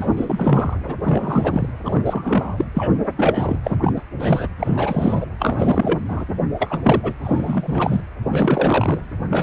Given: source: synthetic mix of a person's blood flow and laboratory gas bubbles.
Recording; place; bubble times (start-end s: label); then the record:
Doppler ultrasound of blood flow; precordium
0.00-0.78 s: bubbles
0.86-0.96 s: bubbles
1.04-1.72 s: bubbles
1.84-2.02 s: bubbles
2.05-2.65 s: bubbles
2.73-2.95 s: bubbles
3.03-3.08 s: bubbles
3.17-3.59 s: bubbles
3.64-3.77 s: bubbles
3.81-3.93 s: bubbles
3.95-4.02 s: bubbles
4.20-4.48 s: bubbles
4.59-5.27 s: bubbles
5.39-6.00 s: bubbles
6.08-6.25 s: bubbles
6.58-7.13 s: bubbles
7.22-8.01 s: bubbles
8.32-9.00 s: bubbles
9.30-9.43 s: bubbles
From the record:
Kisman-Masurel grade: 343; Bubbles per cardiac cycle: rolling drumbeat, 9 or more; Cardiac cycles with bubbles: 100%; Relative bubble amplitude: loud (0.450 to 0.775); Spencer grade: 3 (all of the cardiac periods contain showers or single bubble signals, but not dominating or overriding the cardiac motion signals); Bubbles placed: anywhere in the cardiac cycle